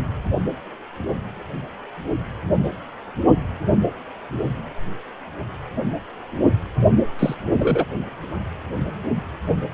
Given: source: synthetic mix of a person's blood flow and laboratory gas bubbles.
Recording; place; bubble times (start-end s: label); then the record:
Doppler ultrasound of blood flow; precordium
7.19-7.34 s: bubbles
7.59-7.85 s: bubbles
From the record:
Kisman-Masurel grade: 213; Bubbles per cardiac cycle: several, 3 to 8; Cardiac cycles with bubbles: 1 to 10%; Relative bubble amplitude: loud (0.450 to 0.775); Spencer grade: 1 (occasional bubble signal discernible with the cardiac motion signal, with majority of cardiac periods free of bubbles); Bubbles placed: only in the low amplitude regions of the cardiac cycle